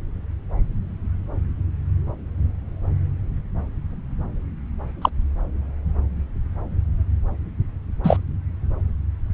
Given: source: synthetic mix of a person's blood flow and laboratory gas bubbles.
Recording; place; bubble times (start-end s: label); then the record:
Doppler ultrasound of blood flow; subclavian vein
5.01-5.09 s: bubbles
8.04-8.17 s: bubbles
From the record:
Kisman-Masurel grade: 113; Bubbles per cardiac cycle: 1 to 2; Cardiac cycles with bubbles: 1 to 10%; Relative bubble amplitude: loud (0.450 to 0.775); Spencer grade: 1 (occasional bubble signal discernible with the cardiac motion signal, with majority of cardiac periods free of bubbles); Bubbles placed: anywhere in the cardiac cycle